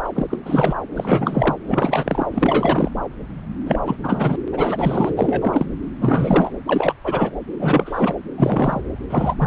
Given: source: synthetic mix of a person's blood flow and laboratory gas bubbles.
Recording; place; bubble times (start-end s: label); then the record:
Doppler ultrasound of blood flow; subclavian vein
0.04-0.09 s: bubbles
0.14-0.26 s: bubbles
0.30-0.38 s: bubbles
0.45-0.77 s: bubbles
0.95-1.56 s: bubbles
1.68-2.26 s: bubbles
2.31-2.91 s: bubbles
3.65-3.79 s: bubbles
3.85-3.96 s: bubbles
4.04-4.36 s: bubbles
4.52-5.13 s: bubbles
5.17-5.66 s: bubbles
6.01-6.50 s: bubbles
6.67-6.94 s: bubbles
7.04-7.30 s: bubbles
7.59-8.14 s: bubbles
8.38-8.81 s: bubbles
9.10-9.36 s: bubbles
9.38-9.47 s: bubbles
From the record:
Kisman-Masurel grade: 342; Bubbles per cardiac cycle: rolling drumbeat, 9 or more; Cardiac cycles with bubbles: 100%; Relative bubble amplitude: moderate (0.250 to 0.450); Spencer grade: 3 (all of the cardiac periods contain showers or single bubble signals, but not dominating or overriding the cardiac motion signals); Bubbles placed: anywhere in the cardiac cycle